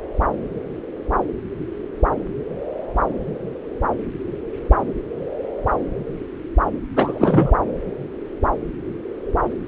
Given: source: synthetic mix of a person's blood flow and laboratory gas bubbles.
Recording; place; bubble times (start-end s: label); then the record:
Doppler ultrasound of blood flow; subclavian vein
6.96-7.56 s: bubbles
From the record:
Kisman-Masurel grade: 213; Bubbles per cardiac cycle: several, 3 to 8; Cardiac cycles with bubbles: 1 to 10%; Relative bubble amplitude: loud (0.450 to 0.775); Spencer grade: 1 (occasional bubble signal discernible with the cardiac motion signal, with majority of cardiac periods free of bubbles); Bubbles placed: anywhere in the cardiac cycle